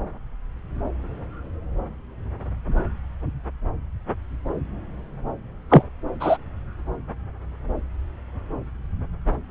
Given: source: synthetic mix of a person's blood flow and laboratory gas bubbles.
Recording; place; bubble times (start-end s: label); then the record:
Doppler ultrasound of blood flow; subclavian vein
5.69-5.82 s: bubbles
6.20-6.37 s: bubbles
From the record:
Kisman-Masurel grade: 113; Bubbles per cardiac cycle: 1 to 2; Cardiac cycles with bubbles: 1 to 10%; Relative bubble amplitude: loud (0.450 to 0.775); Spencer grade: 1 (occasional bubble signal discernible with the cardiac motion signal, with majority of cardiac periods free of bubbles); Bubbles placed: anywhere in the cardiac cycle